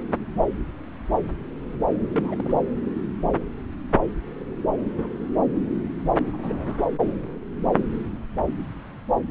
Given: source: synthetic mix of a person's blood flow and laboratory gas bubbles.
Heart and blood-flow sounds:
Doppler ultrasound of blood flow; subclavian vein
2.10-2.58 s: bubbles
6.16-6.22 s: bubbles
6.26-6.37 s: bubbles
6.42-6.74 s: bubbles
From the record:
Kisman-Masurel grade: 221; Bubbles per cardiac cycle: several, 3 to 8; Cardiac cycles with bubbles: 10 to 50%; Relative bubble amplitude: barely perceptible (0.100 to 0.250); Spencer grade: 2 (many but less than half of the cardiac periods contain bubble signals, singularly or in groups); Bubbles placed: anywhere in the cardiac cycle

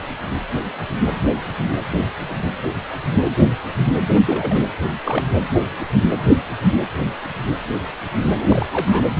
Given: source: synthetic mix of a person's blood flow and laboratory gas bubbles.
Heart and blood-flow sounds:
Doppler ultrasound of blood flow; precordium
4.25-4.62 s: bubbles
5.04-5.24 s: bubbles
8.39-8.47 s: bubbles
8.50-8.66 s: bubbles
8.70-9.02 s: bubbles
From the record:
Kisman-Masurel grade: 222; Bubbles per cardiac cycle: several, 3 to 8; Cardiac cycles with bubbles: 10 to 50%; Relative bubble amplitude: moderate (0.250 to 0.450); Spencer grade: 2 (many but less than half of the cardiac periods contain bubble signals, singularly or in groups); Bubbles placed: anywhere in the cardiac cycle

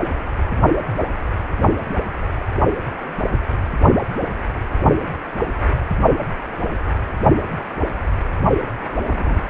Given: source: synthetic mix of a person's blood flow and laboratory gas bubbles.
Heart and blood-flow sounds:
Doppler ultrasound of blood flow; precordium
9.04-9.41 s: bubbles
From the record:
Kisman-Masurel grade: 111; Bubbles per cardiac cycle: 1 to 2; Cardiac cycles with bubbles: 1 to 10%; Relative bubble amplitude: barely perceptible (0.100 to 0.250); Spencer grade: 1 (occasional bubble signal discernible with the cardiac motion signal, with majority of cardiac periods free of bubbles); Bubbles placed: only in the low amplitude regions of the cardiac cycle

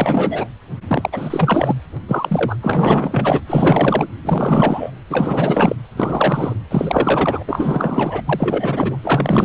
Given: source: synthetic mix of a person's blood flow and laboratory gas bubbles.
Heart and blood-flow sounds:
Doppler ultrasound of blood flow; precordium
0.00-0.48 s: bubbles
0.88-1.75 s: bubbles
2.08-2.56 s: bubbles
2.62-3.40 s: bubbles
3.46-4.07 s: bubbles
4.25-4.91 s: bubbles
5.10-5.75 s: bubbles
5.96-6.54 s: bubbles
6.71-7.43 s: bubbles
7.48-8.21 s: bubbles
8.26-8.97 s: bubbles
9.03-9.45 s: bubbles
From the record:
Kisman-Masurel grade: 444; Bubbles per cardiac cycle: continuous sound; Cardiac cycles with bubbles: 100%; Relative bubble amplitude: maximal (0.775 to 0.999); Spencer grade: 4 (maximum detectable bubble signal sounding continuously throughout systole and diastole of every cardiac period, and overriding the amplitude of the normal cardiac signals); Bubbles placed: anywhere in the cardiac cycle

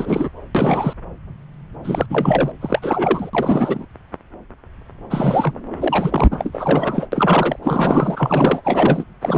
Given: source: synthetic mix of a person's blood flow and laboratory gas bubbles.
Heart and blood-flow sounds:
Doppler ultrasound of blood flow; subclavian vein
0.00-0.29 s: bubbles
0.54-0.94 s: bubbles
1.83-2.06 s: bubbles
2.10-2.52 s: bubbles
2.61-3.31 s: bubbles
3.33-3.85 s: bubbles
5.10-5.53 s: bubbles
5.79-7.06 s: bubbles
7.12-7.59 s: bubbles
7.62-8.61 s: bubbles
8.65-9.04 s: bubbles
9.21-9.38 s: bubbles
From the record:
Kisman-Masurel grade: 332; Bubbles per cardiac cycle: rolling drumbeat, 9 or more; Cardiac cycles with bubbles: 50 to 99%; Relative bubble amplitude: moderate (0.250 to 0.450); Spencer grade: 3 (all of the cardiac periods contain showers or single bubble signals, but not dominating or overriding the cardiac motion signals); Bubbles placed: anywhere in the cardiac cycle

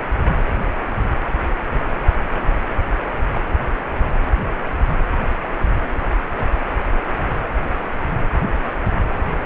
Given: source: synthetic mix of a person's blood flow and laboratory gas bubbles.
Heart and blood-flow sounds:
Doppler ultrasound of blood flow; precordium
2.35-2.39 s: bubbles
From the record:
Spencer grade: 1 (occasional bubble signal discernible with the cardiac motion signal, with majority of cardiac periods free of bubbles); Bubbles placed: anywhere in the cardiac cycle

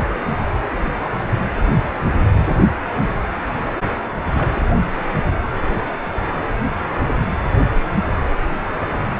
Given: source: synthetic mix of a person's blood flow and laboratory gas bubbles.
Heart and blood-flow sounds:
Doppler ultrasound of blood flow; precordium
4.34-4.62 s: bubbles
From the record:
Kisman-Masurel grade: 211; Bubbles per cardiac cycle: several, 3 to 8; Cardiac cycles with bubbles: 1 to 10%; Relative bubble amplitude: barely perceptible (0.100 to 0.250); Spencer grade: 1 (occasional bubble signal discernible with the cardiac motion signal, with majority of cardiac periods free of bubbles); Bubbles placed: anywhere in the cardiac cycle

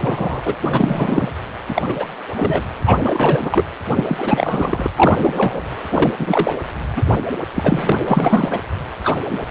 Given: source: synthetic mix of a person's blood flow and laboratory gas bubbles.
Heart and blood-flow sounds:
Doppler ultrasound of blood flow; precordium
0.00-0.41 s: bubbles
0.45-0.56 s: bubbles
0.62-1.29 s: bubbles
1.69-1.82 s: bubbles
1.88-1.95 s: bubbles
1.99-2.07 s: bubbles
2.36-2.62 s: bubbles
2.85-3.66 s: bubbles
3.96-4.88 s: bubbles
4.96-5.62 s: bubbles
5.90-6.16 s: bubbles
6.19-6.57 s: bubbles
6.96-7.04 s: bubbles
7.09-7.14 s: bubbles
7.31-7.37 s: bubbles
7.54-7.92 s: bubbles
8.07-8.60 s: bubbles
9.04-9.16 s: bubbles
9.29-9.46 s: bubbles
From the record:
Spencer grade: 3 (all of the cardiac periods contain showers or single bubble signals, but not dominating or overriding the cardiac motion signals); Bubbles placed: anywhere in the cardiac cycle

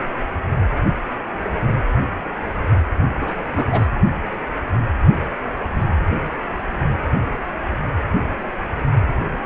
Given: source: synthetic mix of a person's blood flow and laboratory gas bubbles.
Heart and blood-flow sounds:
Doppler ultrasound of blood flow; precordium
3.20-3.67 s: bubbles
3.72-3.88 s: bubbles
From the record:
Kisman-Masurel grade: 212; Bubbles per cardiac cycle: several, 3 to 8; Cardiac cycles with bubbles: 1 to 10%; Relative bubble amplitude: moderate (0.250 to 0.450); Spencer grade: 1 (occasional bubble signal discernible with the cardiac motion signal, with majority of cardiac periods free of bubbles); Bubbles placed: anywhere in the cardiac cycle

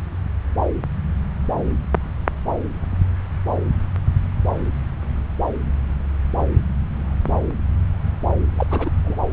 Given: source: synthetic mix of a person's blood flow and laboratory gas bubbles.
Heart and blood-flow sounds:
Doppler ultrasound of blood flow; subclavian vein
8.55-8.67 s: bubbles
8.69-8.90 s: bubbles
9.05-9.16 s: bubbles
From the record:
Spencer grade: 1 (occasional bubble signal discernible with the cardiac motion signal, with majority of cardiac periods free of bubbles); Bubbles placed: anywhere in the cardiac cycle

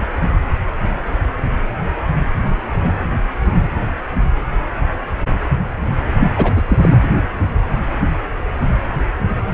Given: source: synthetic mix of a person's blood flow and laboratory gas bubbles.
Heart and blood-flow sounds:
Doppler ultrasound of blood flow; precordium
6.20-6.28 s: bubbles
6.36-6.62 s: bubbles
6.68-6.97 s: bubbles
From the record:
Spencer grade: 1 (occasional bubble signal discernible with the cardiac motion signal, with majority of cardiac periods free of bubbles); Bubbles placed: anywhere in the cardiac cycle

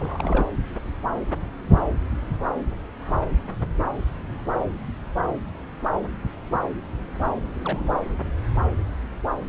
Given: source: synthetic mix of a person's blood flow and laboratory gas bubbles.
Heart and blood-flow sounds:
Doppler ultrasound of blood flow; subclavian vein
0.00-0.48 s: bubbles
7.54-7.95 s: bubbles
From the record:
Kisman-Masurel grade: 211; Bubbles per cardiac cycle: several, 3 to 8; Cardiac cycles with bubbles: 1 to 10%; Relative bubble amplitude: barely perceptible (0.100 to 0.250); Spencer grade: 1 (occasional bubble signal discernible with the cardiac motion signal, with majority of cardiac periods free of bubbles); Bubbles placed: anywhere in the cardiac cycle

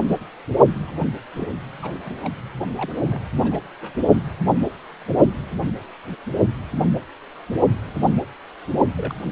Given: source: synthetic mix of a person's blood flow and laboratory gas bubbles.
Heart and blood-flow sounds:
Doppler ultrasound of blood flow; precordium
0.87-1.06 s: bubbles
1.35-1.52 s: bubbles
1.82-1.94 s: bubbles
2.02-2.18 s: bubbles
2.23-2.33 s: bubbles
2.75-2.93 s: bubbles
3.11-3.21 s: bubbles
3.43-3.60 s: bubbles
3.81-3.92 s: bubbles
8.96-9.13 s: bubbles
9.23-9.32 s: bubbles
From the record:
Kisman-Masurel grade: 221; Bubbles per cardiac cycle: several, 3 to 8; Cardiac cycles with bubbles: 10 to 50%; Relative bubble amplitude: barely perceptible (0.100 to 0.250); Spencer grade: 2 (many but less than half of the cardiac periods contain bubble signals, singularly or in groups); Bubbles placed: only in the low amplitude regions of the cardiac cycle

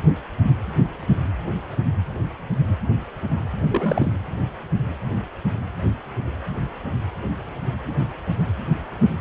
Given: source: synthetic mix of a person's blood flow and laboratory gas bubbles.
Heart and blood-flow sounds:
Doppler ultrasound of blood flow; precordium
3.70-4.12 s: bubbles
From the record:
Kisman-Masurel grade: 212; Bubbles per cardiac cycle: several, 3 to 8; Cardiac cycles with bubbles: 1 to 10%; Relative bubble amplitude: moderate (0.250 to 0.450); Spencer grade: 1 (occasional bubble signal discernible with the cardiac motion signal, with majority of cardiac periods free of bubbles); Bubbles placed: anywhere in the cardiac cycle

